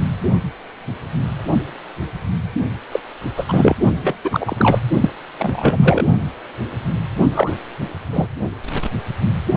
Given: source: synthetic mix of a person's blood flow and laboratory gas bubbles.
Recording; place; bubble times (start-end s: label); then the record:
Doppler ultrasound of blood flow; precordium
2.92-3.00 s: bubbles
3.37-3.44 s: bubbles
3.48-3.75 s: bubbles
4.03-4.14 s: bubbles
4.24-4.56 s: bubbles
4.58-4.79 s: bubbles
5.01-5.10 s: bubbles
5.38-6.05 s: bubbles
7.34-7.51 s: bubbles
8.12-8.27 s: bubbles
From the record:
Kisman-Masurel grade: 223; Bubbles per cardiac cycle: several, 3 to 8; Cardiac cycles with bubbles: 10 to 50%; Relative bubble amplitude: loud (0.450 to 0.775); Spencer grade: 2 (many but less than half of the cardiac periods contain bubble signals, singularly or in groups); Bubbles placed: only in the low amplitude regions of the cardiac cycle